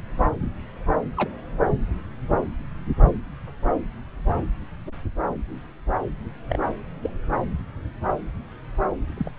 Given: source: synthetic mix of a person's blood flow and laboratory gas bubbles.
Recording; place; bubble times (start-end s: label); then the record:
Doppler ultrasound of blood flow; subclavian vein
1.16-1.30 s: bubbles
6.49-6.60 s: bubbles
7.02-7.10 s: bubbles
9.17-9.31 s: bubbles
From the record:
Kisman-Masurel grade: 122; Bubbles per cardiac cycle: 1 to 2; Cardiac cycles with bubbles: 10 to 50%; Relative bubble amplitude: moderate (0.250 to 0.450); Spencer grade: 2 (many but less than half of the cardiac periods contain bubble signals, singularly or in groups); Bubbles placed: anywhere in the cardiac cycle